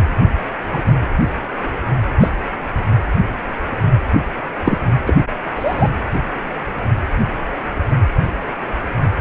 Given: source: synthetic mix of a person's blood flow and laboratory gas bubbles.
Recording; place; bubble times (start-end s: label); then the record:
Doppler ultrasound of blood flow; precordium
0.71-0.93 s: bubbles
2.21-2.29 s: bubbles
4.64-4.78 s: bubbles
5.06-5.17 s: bubbles
5.56-5.88 s: bubbles
From the record:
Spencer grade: 2 (many but less than half of the cardiac periods contain bubble signals, singularly or in groups); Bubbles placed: anywhere in the cardiac cycle